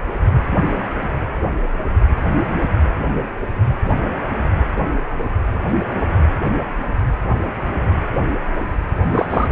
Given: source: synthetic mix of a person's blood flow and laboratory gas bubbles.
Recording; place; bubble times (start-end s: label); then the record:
Doppler ultrasound of blood flow; precordium
9.12-9.48 s: bubbles
From the record:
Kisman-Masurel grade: 213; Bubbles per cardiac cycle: several, 3 to 8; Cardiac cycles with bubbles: 1 to 10%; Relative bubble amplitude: loud (0.450 to 0.775); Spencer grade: 1 (occasional bubble signal discernible with the cardiac motion signal, with majority of cardiac periods free of bubbles); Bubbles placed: anywhere in the cardiac cycle